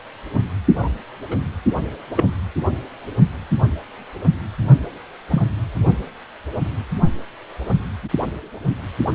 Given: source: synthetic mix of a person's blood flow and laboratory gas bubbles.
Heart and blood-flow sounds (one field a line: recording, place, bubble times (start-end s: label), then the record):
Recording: Doppler ultrasound of blood flow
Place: precordium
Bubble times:
0.79-0.90 s: bubbles
1.31-1.35 s: bubbles
2.16-2.25 s: bubbles
5.30-5.42 s: bubbles
From the record:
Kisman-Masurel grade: 122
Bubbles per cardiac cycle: 1 to 2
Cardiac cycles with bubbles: 10 to 50%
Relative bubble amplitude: moderate (0.250 to 0.450)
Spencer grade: 2 (many but less than half of the cardiac periods contain bubble signals, singularly or in groups)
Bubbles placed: only in the low amplitude regions of the cardiac cycle